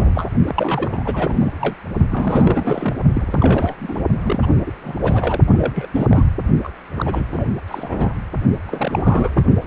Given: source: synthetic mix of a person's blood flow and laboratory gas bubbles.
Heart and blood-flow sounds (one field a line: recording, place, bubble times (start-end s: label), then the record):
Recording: Doppler ultrasound of blood flow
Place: precordium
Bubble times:
0.00-0.31 s: bubbles
0.46-1.76 s: bubbles
2.11-2.98 s: bubbles
3.14-3.75 s: bubbles
3.78-4.01 s: bubbles
4.22-4.40 s: bubbles
4.42-4.46 s: bubbles
4.66-4.71 s: bubbles
4.82-4.99 s: bubbles
5.03-5.40 s: bubbles
5.47-5.86 s: bubbles
5.93-6.07 s: bubbles
6.11-6.27 s: bubbles
6.63-6.72 s: bubbles
6.96-7.50 s: bubbles
7.67-8.14 s: bubbles
8.67-9.43 s: bubbles
From the record:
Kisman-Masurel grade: 342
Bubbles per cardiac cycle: rolling drumbeat, 9 or more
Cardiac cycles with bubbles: 100%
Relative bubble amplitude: moderate (0.250 to 0.450)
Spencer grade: 3 (all of the cardiac periods contain showers or single bubble signals, but not dominating or overriding the cardiac motion signals)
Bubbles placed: only in the low amplitude regions of the cardiac cycle